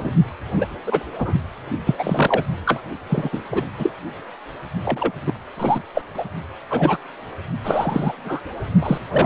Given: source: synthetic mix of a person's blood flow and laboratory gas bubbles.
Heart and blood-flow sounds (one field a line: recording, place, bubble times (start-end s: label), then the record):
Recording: Doppler ultrasound of blood flow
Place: precordium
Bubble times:
0.00-0.10 s: bubbles
0.55-0.67 s: bubbles
0.86-1.03 s: bubbles
1.18-1.33 s: bubbles
1.85-2.44 s: bubbles
2.65-2.81 s: bubbles
3.09-3.42 s: bubbles
3.52-3.66 s: bubbles
3.78-3.90 s: bubbles
4.85-5.12 s: bubbles
5.27-5.34 s: bubbles
5.56-5.82 s: bubbles
5.94-6.02 s: bubbles
6.13-6.24 s: bubbles
6.70-6.97 s: bubbles
7.64-8.13 s: bubbles
8.25-8.42 s: bubbles
8.81-8.98 s: bubbles
9.12-9.26 s: bubbles
From the record:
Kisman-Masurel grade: 243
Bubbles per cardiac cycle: several, 3 to 8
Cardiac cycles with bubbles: 100%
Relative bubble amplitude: loud (0.450 to 0.775)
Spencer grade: 3 (all of the cardiac periods contain showers or single bubble signals, but not dominating or overriding the cardiac motion signals)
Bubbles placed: only in the low amplitude regions of the cardiac cycle